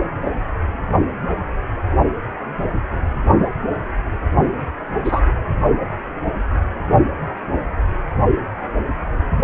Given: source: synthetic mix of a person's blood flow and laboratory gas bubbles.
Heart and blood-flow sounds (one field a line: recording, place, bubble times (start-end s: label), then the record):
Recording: Doppler ultrasound of blood flow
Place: precordium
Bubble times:
5.04-5.20 s: bubbles
From the record:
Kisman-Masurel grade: 113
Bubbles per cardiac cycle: 1 to 2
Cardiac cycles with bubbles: 1 to 10%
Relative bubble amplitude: loud (0.450 to 0.775)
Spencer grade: 1 (occasional bubble signal discernible with the cardiac motion signal, with majority of cardiac periods free of bubbles)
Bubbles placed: only in the low amplitude regions of the cardiac cycle